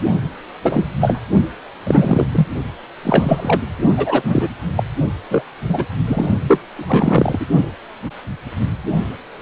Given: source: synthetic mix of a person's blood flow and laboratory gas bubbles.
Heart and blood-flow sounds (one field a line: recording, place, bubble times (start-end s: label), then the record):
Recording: Doppler ultrasound of blood flow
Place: precordium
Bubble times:
0.62-0.87 s: bubbles
1.00-1.22 s: bubbles
1.87-2.27 s: bubbles
2.32-2.47 s: bubbles
3.03-3.61 s: bubbles
3.96-4.49 s: bubbles
4.75-4.83 s: bubbles
5.29-5.42 s: bubbles
5.68-5.86 s: bubbles
6.07-6.26 s: bubbles
6.48-6.61 s: bubbles
6.76-7.46 s: bubbles
From the record:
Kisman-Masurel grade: 233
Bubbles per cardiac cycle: several, 3 to 8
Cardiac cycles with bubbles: 50 to 99%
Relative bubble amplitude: loud (0.450 to 0.775)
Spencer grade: 3 (all of the cardiac periods contain showers or single bubble signals, but not dominating or overriding the cardiac motion signals)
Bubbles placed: only in the low amplitude regions of the cardiac cycle